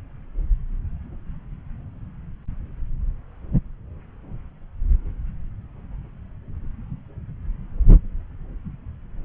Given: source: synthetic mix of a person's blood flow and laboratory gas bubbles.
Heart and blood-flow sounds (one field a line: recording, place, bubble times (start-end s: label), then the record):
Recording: Doppler ultrasound of blood flow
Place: subclavian vein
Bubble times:
no bubbles
From the record:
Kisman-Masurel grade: 000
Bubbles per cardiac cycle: 0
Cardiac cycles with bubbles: 0%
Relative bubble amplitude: no bubbles discernible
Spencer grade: 0 (complete lack of bubble signals)